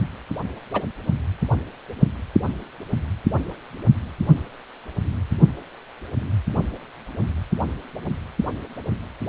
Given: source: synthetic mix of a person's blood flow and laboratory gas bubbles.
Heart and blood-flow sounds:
Doppler ultrasound of blood flow; precordium
0.73-0.82 s: bubbles
From the record:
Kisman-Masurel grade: 112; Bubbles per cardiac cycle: 1 to 2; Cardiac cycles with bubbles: 1 to 10%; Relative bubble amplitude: moderate (0.250 to 0.450); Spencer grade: 1 (occasional bubble signal discernible with the cardiac motion signal, with majority of cardiac periods free of bubbles); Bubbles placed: only in the low amplitude regions of the cardiac cycle

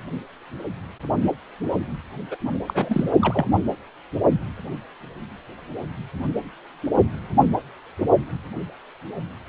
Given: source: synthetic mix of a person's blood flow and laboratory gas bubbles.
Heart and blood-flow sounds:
Doppler ultrasound of blood flow; precordium
2.31-2.36 s: bubbles
2.68-3.10 s: bubbles
3.22-3.47 s: bubbles
From the record:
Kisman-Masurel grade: 222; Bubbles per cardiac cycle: several, 3 to 8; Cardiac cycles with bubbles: 10 to 50%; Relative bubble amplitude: moderate (0.250 to 0.450); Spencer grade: 2 (many but less than half of the cardiac periods contain bubble signals, singularly or in groups); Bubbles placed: anywhere in the cardiac cycle

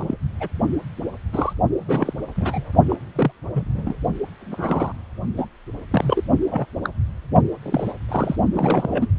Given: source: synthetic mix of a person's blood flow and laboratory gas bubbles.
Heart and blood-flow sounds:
Doppler ultrasound of blood flow; precordium
0.00-0.16 s: bubbles
0.40-0.48 s: bubbles
1.32-1.53 s: bubbles
1.77-2.13 s: bubbles
2.35-2.71 s: bubbles
2.88-2.96 s: bubbles
3.15-3.31 s: bubbles
3.53-3.96 s: bubbles
4.41-4.92 s: bubbles
5.36-5.47 s: bubbles
5.91-6.21 s: bubbles
6.50-6.66 s: bubbles
6.83-6.89 s: bubbles
7.62-7.93 s: bubbles
8.08-8.36 s: bubbles
8.53-9.09 s: bubbles
From the record:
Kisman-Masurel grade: 242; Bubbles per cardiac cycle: several, 3 to 8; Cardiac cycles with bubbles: 100%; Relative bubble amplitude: moderate (0.250 to 0.450); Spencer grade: 3 (all of the cardiac periods contain showers or single bubble signals, but not dominating or overriding the cardiac motion signals); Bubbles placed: only in the low amplitude regions of the cardiac cycle

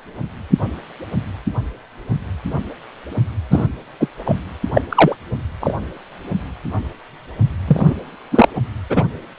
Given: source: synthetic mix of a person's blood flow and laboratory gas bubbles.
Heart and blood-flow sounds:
Doppler ultrasound of blood flow; precordium
3.50-3.67 s: bubbles
4.00-4.08 s: bubbles
4.25-4.36 s: bubbles
4.74-4.82 s: bubbles
4.89-5.16 s: bubbles
5.60-5.75 s: bubbles
7.67-7.95 s: bubbles
8.31-8.48 s: bubbles
8.89-9.04 s: bubbles
From the record:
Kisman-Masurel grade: 233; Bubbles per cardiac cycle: several, 3 to 8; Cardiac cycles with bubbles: 50 to 99%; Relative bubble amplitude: loud (0.450 to 0.775); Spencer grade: 3 (all of the cardiac periods contain showers or single bubble signals, but not dominating or overriding the cardiac motion signals); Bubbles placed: anywhere in the cardiac cycle

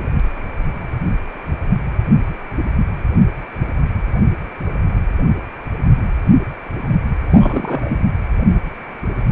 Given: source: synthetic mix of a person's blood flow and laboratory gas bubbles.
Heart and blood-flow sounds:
Doppler ultrasound of blood flow; precordium
7.30-8.01 s: bubbles
From the record:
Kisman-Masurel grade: 212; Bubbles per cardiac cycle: several, 3 to 8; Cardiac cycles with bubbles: 1 to 10%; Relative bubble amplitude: moderate (0.250 to 0.450); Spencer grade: 1 (occasional bubble signal discernible with the cardiac motion signal, with majority of cardiac periods free of bubbles); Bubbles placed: only in the low amplitude regions of the cardiac cycle

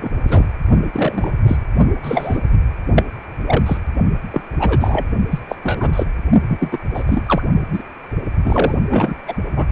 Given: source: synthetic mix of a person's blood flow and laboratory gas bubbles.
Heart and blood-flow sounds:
Doppler ultrasound of blood flow; precordium
0.01-0.11 s: bubbles
0.27-0.45 s: bubbles
0.94-1.33 s: bubbles
1.48-1.56 s: bubbles
2.03-2.38 s: bubbles
2.96-3.04 s: bubbles
3.46-3.77 s: bubbles
4.30-4.42 s: bubbles
4.59-5.06 s: bubbles
5.30-5.39 s: bubbles
5.48-5.55 s: bubbles
5.63-6.06 s: bubbles
6.49-6.58 s: bubbles
6.60-6.79 s: bubbles
6.93-7.04 s: bubbles
7.06-7.42 s: bubbles
7.72-7.82 s: bubbles
8.44-8.74 s: bubbles
8.90-9.15 s: bubbles
9.27-9.35 s: bubbles
9.56-9.65 s: bubbles
From the record:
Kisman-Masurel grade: 233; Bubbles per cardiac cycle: several, 3 to 8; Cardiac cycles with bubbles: 50 to 99%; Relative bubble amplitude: loud (0.450 to 0.775); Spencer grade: 3 (all of the cardiac periods contain showers or single bubble signals, but not dominating or overriding the cardiac motion signals); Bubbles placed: only in the low amplitude regions of the cardiac cycle

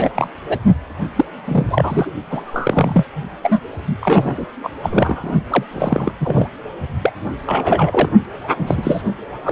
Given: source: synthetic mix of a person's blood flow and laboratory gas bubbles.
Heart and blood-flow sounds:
Doppler ultrasound of blood flow; precordium
0.00-0.10 s: bubbles
0.14-0.28 s: bubbles
0.48-0.59 s: bubbles
1.16-1.25 s: bubbles
1.46-1.66 s: bubbles
1.68-2.11 s: bubbles
2.30-3.04 s: bubbles
3.42-3.60 s: bubbles
4.01-4.46 s: bubbles
4.63-4.70 s: bubbles
4.82-5.32 s: bubbles
5.50-5.63 s: bubbles
5.72-6.12 s: bubbles
6.20-6.48 s: bubbles
7.02-7.11 s: bubbles
7.46-8.09 s: bubbles
8.57-9.02 s: bubbles
9.44-9.52 s: bubbles
From the record:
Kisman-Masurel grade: 243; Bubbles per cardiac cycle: several, 3 to 8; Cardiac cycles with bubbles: 100%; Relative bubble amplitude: loud (0.450 to 0.775); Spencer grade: 3 (all of the cardiac periods contain showers or single bubble signals, but not dominating or overriding the cardiac motion signals); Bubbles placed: only in the low amplitude regions of the cardiac cycle

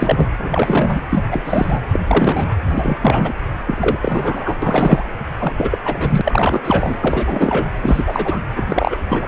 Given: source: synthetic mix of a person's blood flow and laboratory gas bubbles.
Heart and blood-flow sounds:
Doppler ultrasound of blood flow; precordium
0.00-0.27 s: bubbles
0.39-1.02 s: bubbles
1.09-1.25 s: bubbles
1.30-1.79 s: bubbles
1.92-2.00 s: bubbles
2.08-2.48 s: bubbles
2.67-2.97 s: bubbles
3.00-3.33 s: bubbles
3.66-3.78 s: bubbles
3.81-3.99 s: bubbles
4.01-4.57 s: bubbles
4.62-5.04 s: bubbles
5.38-5.78 s: bubbles
5.84-6.61 s: bubbles
6.64-6.97 s: bubbles
7.01-7.70 s: bubbles
7.82-8.04 s: bubbles
8.06-8.42 s: bubbles
8.56-8.64 s: bubbles
8.69-8.97 s: bubbles
9.10-9.27 s: bubbles
From the record:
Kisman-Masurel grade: 343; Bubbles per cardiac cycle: rolling drumbeat, 9 or more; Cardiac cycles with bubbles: 100%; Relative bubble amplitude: loud (0.450 to 0.775); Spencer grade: 3 (all of the cardiac periods contain showers or single bubble signals, but not dominating or overriding the cardiac motion signals); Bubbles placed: anywhere in the cardiac cycle

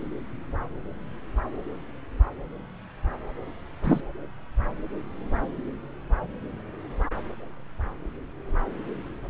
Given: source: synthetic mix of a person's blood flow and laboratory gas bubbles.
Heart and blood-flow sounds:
Doppler ultrasound of blood flow; subclavian vein
3.84-4.00 s: bubbles
From the record:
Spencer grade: 1 (occasional bubble signal discernible with the cardiac motion signal, with majority of cardiac periods free of bubbles); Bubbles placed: anywhere in the cardiac cycle

